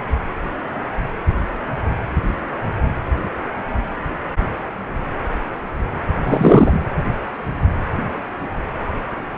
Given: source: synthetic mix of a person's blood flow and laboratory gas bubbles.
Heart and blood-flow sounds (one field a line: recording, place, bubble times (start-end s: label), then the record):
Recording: Doppler ultrasound of blood flow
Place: precordium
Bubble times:
6.23-6.79 s: bubbles
From the record:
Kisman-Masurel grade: 223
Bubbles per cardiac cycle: several, 3 to 8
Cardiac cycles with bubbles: 10 to 50%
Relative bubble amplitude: loud (0.450 to 0.775)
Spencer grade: 2 (many but less than half of the cardiac periods contain bubble signals, singularly or in groups)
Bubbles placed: anywhere in the cardiac cycle